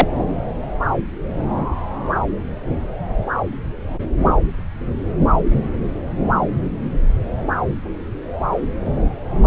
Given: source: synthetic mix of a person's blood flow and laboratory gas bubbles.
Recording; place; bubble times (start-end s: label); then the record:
Doppler ultrasound of blood flow; subclavian vein
0.00-0.07 s: bubbles
From the record:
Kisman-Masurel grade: 213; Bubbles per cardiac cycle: several, 3 to 8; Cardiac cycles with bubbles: 1 to 10%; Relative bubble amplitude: loud (0.450 to 0.775); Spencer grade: 1 (occasional bubble signal discernible with the cardiac motion signal, with majority of cardiac periods free of bubbles); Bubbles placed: anywhere in the cardiac cycle